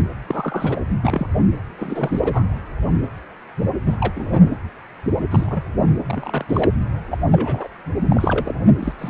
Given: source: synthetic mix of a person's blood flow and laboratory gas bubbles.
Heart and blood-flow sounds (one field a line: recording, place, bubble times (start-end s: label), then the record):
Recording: Doppler ultrasound of blood flow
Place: precordium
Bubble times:
0.28-0.81 s: bubbles
1.03-1.27 s: bubbles
1.77-2.44 s: bubbles
3.85-3.98 s: bubbles
4.00-4.12 s: bubbles
4.15-4.49 s: bubbles
5.30-5.62 s: bubbles
6.06-6.44 s: bubbles
6.48-6.71 s: bubbles
7.08-7.17 s: bubbles
7.31-7.68 s: bubbles
8.10-8.54 s: bubbles
8.82-8.93 s: bubbles
8.99-9.10 s: bubbles
From the record:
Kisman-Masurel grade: 232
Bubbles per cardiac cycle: several, 3 to 8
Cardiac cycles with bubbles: 50 to 99%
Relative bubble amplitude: moderate (0.250 to 0.450)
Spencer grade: 3 (all of the cardiac periods contain showers or single bubble signals, but not dominating or overriding the cardiac motion signals)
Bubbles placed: anywhere in the cardiac cycle